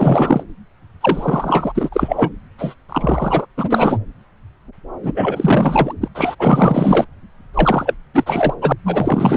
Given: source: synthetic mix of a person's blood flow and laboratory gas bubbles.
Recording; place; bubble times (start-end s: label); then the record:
Doppler ultrasound of blood flow; subclavian vein
0.00-0.44 s: bubbles
1.00-1.90 s: bubbles
1.92-2.32 s: bubbles
2.58-2.75 s: bubbles
2.88-3.46 s: bubbles
3.57-3.98 s: bubbles
5.03-5.93 s: bubbles
6.00-6.08 s: bubbles
6.14-6.35 s: bubbles
6.39-7.05 s: bubbles
7.54-7.95 s: bubbles
8.14-8.54 s: bubbles
8.61-8.72 s: bubbles
8.86-9.37 s: bubbles
From the record:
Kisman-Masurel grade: 444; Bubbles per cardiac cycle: continuous sound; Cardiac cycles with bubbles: 100%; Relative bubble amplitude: maximal (0.775 to 0.999); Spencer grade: 4 (maximum detectable bubble signal sounding continuously throughout systole and diastole of every cardiac period, and overriding the amplitude of the normal cardiac signals); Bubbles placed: anywhere in the cardiac cycle